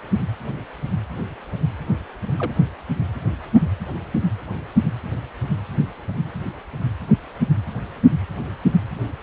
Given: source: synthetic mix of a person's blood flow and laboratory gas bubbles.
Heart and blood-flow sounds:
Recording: Doppler ultrasound of blood flow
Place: precordium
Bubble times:
2.28-2.35 s: bubbles
2.39-2.52 s: bubbles
From the record:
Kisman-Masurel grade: 111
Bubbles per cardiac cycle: 1 to 2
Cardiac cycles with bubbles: 1 to 10%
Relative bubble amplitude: barely perceptible (0.100 to 0.250)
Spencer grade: 1 (occasional bubble signal discernible with the cardiac motion signal, with majority of cardiac periods free of bubbles)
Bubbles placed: only in the low amplitude regions of the cardiac cycle

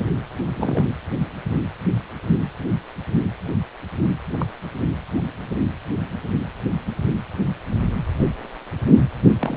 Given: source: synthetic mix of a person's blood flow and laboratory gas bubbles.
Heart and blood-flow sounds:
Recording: Doppler ultrasound of blood flow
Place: precordium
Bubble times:
0.56-0.85 s: bubbles
4.39-4.46 s: bubbles
9.40-9.57 s: bubbles
From the record:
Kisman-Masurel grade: 122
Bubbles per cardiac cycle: 1 to 2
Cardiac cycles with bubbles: 10 to 50%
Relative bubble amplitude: moderate (0.250 to 0.450)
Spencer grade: 2 (many but less than half of the cardiac periods contain bubble signals, singularly or in groups)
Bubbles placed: anywhere in the cardiac cycle

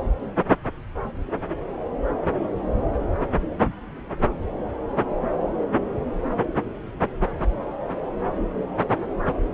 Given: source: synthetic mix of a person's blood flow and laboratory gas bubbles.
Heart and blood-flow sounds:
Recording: Doppler ultrasound of blood flow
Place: subclavian vein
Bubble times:
no bubbles
From the record:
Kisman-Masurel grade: 000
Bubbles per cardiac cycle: 0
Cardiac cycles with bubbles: 0%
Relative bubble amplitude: no bubbles discernible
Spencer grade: 0 (complete lack of bubble signals)

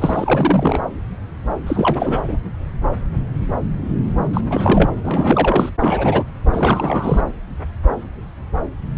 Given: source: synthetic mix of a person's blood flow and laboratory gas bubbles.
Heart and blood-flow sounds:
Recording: Doppler ultrasound of blood flow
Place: subclavian vein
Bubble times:
0.00-0.80 s: bubbles
1.67-2.24 s: bubbles
2.27-2.38 s: bubbles
4.33-4.41 s: bubbles
4.49-4.90 s: bubbles
5.03-5.70 s: bubbles
5.80-6.23 s: bubbles
6.53-7.21 s: bubbles
From the record:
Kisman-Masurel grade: 333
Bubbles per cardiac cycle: rolling drumbeat, 9 or more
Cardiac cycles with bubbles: 50 to 99%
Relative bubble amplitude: loud (0.450 to 0.775)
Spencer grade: 3 (all of the cardiac periods contain showers or single bubble signals, but not dominating or overriding the cardiac motion signals)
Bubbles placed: anywhere in the cardiac cycle

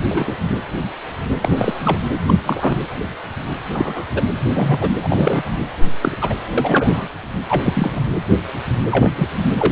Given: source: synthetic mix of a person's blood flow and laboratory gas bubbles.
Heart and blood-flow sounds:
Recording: Doppler ultrasound of blood flow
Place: precordium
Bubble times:
0.09-0.35 s: bubbles
1.41-1.98 s: bubbles
2.27-2.33 s: bubbles
2.44-2.78 s: bubbles
3.73-4.06 s: bubbles
4.10-4.24 s: bubbles
4.45-4.89 s: bubbles
5.03-5.50 s: bubbles
6.01-6.17 s: bubbles
6.21-6.35 s: bubbles
6.57-7.08 s: bubbles
7.48-8.01 s: bubbles
8.91-9.12 s: bubbles
9.15-9.28 s: bubbles
9.55-9.72 s: bubbles
From the record:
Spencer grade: 3 (all of the cardiac periods contain showers or single bubble signals, but not dominating or overriding the cardiac motion signals)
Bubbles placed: anywhere in the cardiac cycle

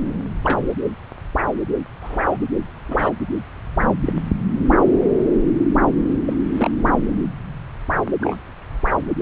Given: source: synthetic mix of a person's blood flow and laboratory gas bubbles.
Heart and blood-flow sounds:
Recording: Doppler ultrasound of blood flow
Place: subclavian vein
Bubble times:
0.43-0.59 s: bubbles
2.01-2.38 s: bubbles
2.88-3.10 s: bubbles
4.06-4.13 s: bubbles
6.25-6.34 s: bubbles
6.58-6.70 s: bubbles
8.21-8.38 s: bubbles
From the record:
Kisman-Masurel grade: 122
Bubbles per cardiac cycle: 1 to 2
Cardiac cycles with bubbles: 10 to 50%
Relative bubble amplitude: moderate (0.250 to 0.450)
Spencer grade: 2 (many but less than half of the cardiac periods contain bubble signals, singularly or in groups)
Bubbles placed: anywhere in the cardiac cycle

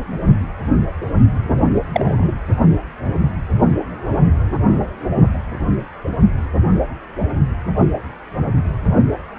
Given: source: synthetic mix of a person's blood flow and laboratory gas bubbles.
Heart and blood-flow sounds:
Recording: Doppler ultrasound of blood flow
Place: precordium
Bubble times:
1.89-2.34 s: bubbles
From the record:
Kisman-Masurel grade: 113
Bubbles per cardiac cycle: 1 to 2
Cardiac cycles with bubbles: 1 to 10%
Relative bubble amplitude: loud (0.450 to 0.775)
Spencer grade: 1 (occasional bubble signal discernible with the cardiac motion signal, with majority of cardiac periods free of bubbles)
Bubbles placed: anywhere in the cardiac cycle

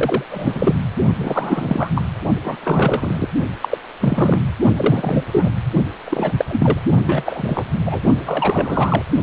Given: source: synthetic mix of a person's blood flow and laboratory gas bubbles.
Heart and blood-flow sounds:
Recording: Doppler ultrasound of blood flow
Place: precordium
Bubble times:
0.00-0.24 s: bubbles
0.30-0.76 s: bubbles
1.19-1.93 s: bubbles
1.95-2.04 s: bubbles
2.44-2.56 s: bubbles
2.63-3.27 s: bubbles
3.61-3.78 s: bubbles
4.01-4.42 s: bubbles
4.76-5.25 s: bubbles
5.32-5.50 s: bubbles
6.04-6.45 s: bubbles
6.48-6.80 s: bubbles
7.07-7.64 s: bubbles
7.86-8.01 s: bubbles
8.26-9.03 s: bubbles
From the record:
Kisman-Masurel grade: 343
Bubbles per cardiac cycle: rolling drumbeat, 9 or more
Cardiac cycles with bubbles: 100%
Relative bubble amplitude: loud (0.450 to 0.775)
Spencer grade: 3 (all of the cardiac periods contain showers or single bubble signals, but not dominating or overriding the cardiac motion signals)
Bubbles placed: only in the low amplitude regions of the cardiac cycle

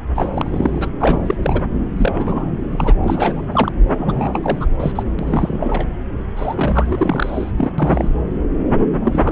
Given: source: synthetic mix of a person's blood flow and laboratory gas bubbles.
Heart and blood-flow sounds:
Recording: Doppler ultrasound of blood flow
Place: subclavian vein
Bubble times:
0.15-0.91 s: bubbles
1.00-1.62 s: bubbles
1.96-2.52 s: bubbles
2.71-2.94 s: bubbles
3.04-3.41 s: bubbles
3.52-3.72 s: bubbles
3.97-4.65 s: bubbles
4.79-4.92 s: bubbles
4.95-5.03 s: bubbles
5.18-5.88 s: bubbles
6.36-7.52 s: bubbles
7.57-7.70 s: bubbles
7.78-8.10 s: bubbles
9.04-9.32 s: bubbles
From the record:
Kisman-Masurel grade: 332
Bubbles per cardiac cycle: rolling drumbeat, 9 or more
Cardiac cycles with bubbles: 50 to 99%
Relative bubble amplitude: moderate (0.250 to 0.450)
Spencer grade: 3 (all of the cardiac periods contain showers or single bubble signals, but not dominating or overriding the cardiac motion signals)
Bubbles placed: anywhere in the cardiac cycle

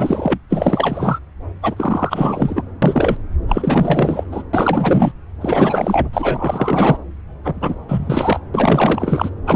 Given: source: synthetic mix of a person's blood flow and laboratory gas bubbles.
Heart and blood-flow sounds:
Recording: Doppler ultrasound of blood flow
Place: subclavian vein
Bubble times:
0.00-0.38 s: bubbles
0.49-1.20 s: bubbles
1.62-2.63 s: bubbles
2.82-3.17 s: bubbles
3.48-4.23 s: bubbles
4.31-4.43 s: bubbles
4.53-5.12 s: bubbles
5.41-6.08 s: bubbles
6.13-6.97 s: bubbles
7.43-7.75 s: bubbles
7.88-8.39 s: bubbles
8.54-9.29 s: bubbles
9.46-9.56 s: bubbles
From the record:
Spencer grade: 4 (maximum detectable bubble signal sounding continuously throughout systole and diastole of every cardiac period, and overriding the amplitude of the normal cardiac signals)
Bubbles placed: anywhere in the cardiac cycle

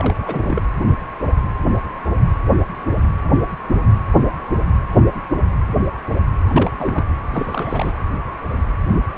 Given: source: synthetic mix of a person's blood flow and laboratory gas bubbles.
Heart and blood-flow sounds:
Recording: Doppler ultrasound of blood flow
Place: precordium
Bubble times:
0.00-0.67 s: bubbles
6.49-6.69 s: bubbles
6.79-7.04 s: bubbles
7.31-7.92 s: bubbles
From the record:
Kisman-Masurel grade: 222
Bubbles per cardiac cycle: several, 3 to 8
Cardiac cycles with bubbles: 10 to 50%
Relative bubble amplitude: moderate (0.250 to 0.450)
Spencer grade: 2 (many but less than half of the cardiac periods contain bubble signals, singularly or in groups)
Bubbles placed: anywhere in the cardiac cycle

